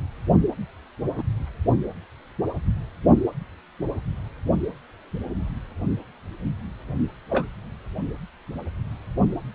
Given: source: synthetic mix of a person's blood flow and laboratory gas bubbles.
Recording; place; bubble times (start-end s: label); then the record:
Doppler ultrasound of blood flow; precordium
1.18-1.23 s: bubbles
7.29-7.46 s: bubbles
From the record:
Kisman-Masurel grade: 121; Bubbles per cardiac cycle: 1 to 2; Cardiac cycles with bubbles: 10 to 50%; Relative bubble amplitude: barely perceptible (0.100 to 0.250); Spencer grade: 2 (many but less than half of the cardiac periods contain bubble signals, singularly or in groups); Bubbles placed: only in the low amplitude regions of the cardiac cycle